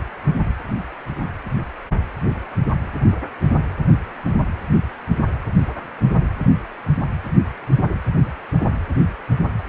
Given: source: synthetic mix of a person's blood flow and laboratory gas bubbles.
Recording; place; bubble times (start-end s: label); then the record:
Doppler ultrasound of blood flow; precordium
no bubbles
From the record:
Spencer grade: 0 (complete lack of bubble signals)